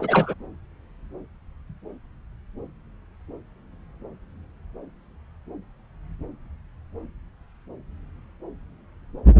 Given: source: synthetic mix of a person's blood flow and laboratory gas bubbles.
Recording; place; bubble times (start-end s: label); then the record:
Doppler ultrasound of blood flow; subclavian vein
0.00-0.34 s: bubbles
From the record:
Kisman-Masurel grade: 222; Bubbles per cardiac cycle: several, 3 to 8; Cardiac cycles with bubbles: 10 to 50%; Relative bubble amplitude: moderate (0.250 to 0.450); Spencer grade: 2 (many but less than half of the cardiac periods contain bubble signals, singularly or in groups); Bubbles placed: anywhere in the cardiac cycle